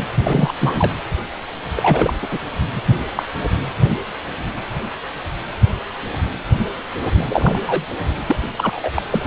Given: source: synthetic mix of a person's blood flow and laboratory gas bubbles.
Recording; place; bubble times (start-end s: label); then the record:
Doppler ultrasound of blood flow; precordium
0.17-0.53 s: bubbles
0.60-0.92 s: bubbles
1.75-2.13 s: bubbles
2.22-2.27 s: bubbles
2.31-2.39 s: bubbles
2.75-2.81 s: bubbles
3.15-3.23 s: bubbles
7.14-7.59 s: bubbles
7.64-7.93 s: bubbles
8.28-8.36 s: bubbles
8.54-8.90 s: bubbles
8.95-9.02 s: bubbles
9.11-9.27 s: bubbles
From the record:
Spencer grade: 2 (many but less than half of the cardiac periods contain bubble signals, singularly or in groups); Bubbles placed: anywhere in the cardiac cycle